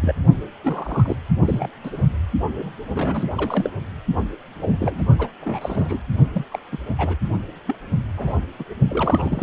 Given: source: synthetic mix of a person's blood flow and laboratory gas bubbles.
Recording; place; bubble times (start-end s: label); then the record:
Doppler ultrasound of blood flow; precordium
0.01-0.13 s: bubbles
0.63-1.16 s: bubbles
1.45-1.68 s: bubbles
1.83-2.02 s: bubbles
2.55-2.70 s: bubbles
2.94-3.29 s: bubbles
3.36-3.70 s: bubbles
4.60-5.03 s: bubbles
5.19-5.28 s: bubbles
5.41-5.98 s: bubbles
6.33-6.45 s: bubbles
6.52-6.58 s: bubbles
6.71-6.78 s: bubbles
6.98-7.16 s: bubbles
7.66-7.75 s: bubbles
8.16-8.34 s: bubbles
8.59-8.64 s: bubbles
8.88-9.43 s: bubbles
From the record:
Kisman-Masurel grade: 232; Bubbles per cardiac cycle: several, 3 to 8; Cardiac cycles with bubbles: 50 to 99%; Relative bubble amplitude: moderate (0.250 to 0.450); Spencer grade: 3 (all of the cardiac periods contain showers or single bubble signals, but not dominating or overriding the cardiac motion signals); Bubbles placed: only in the low amplitude regions of the cardiac cycle